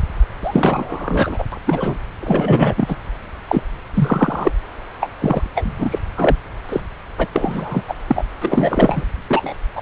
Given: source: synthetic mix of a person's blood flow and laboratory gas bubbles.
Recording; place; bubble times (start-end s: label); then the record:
Doppler ultrasound of blood flow; subclavian vein
0.42-1.46 s: bubbles
1.52-1.58 s: bubbles
1.67-1.97 s: bubbles
2.20-2.98 s: bubbles
3.48-3.62 s: bubbles
3.94-4.52 s: bubbles
5.00-5.10 s: bubbles
5.21-5.51 s: bubbles
5.54-5.98 s: bubbles
6.15-6.37 s: bubbles
6.69-6.81 s: bubbles
7.18-7.28 s: bubbles
7.32-7.82 s: bubbles
7.88-7.95 s: bubbles
8.07-8.24 s: bubbles
8.41-9.04 s: bubbles
9.29-9.54 s: bubbles
9.75-9.81 s: bubbles
From the record:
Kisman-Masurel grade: 243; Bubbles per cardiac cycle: several, 3 to 8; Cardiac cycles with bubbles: 100%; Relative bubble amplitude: loud (0.450 to 0.775); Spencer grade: 3 (all of the cardiac periods contain showers or single bubble signals, but not dominating or overriding the cardiac motion signals); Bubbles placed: anywhere in the cardiac cycle